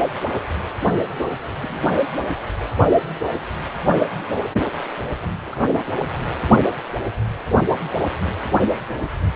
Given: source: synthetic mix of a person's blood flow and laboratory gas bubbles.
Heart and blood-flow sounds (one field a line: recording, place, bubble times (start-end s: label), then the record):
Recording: Doppler ultrasound of blood flow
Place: precordium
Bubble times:
1.61-1.80 s: bubbles
5.45-5.59 s: bubbles
From the record:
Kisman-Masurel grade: 121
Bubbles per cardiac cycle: 1 to 2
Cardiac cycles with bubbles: 10 to 50%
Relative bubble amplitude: barely perceptible (0.100 to 0.250)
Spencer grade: 2 (many but less than half of the cardiac periods contain bubble signals, singularly or in groups)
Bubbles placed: anywhere in the cardiac cycle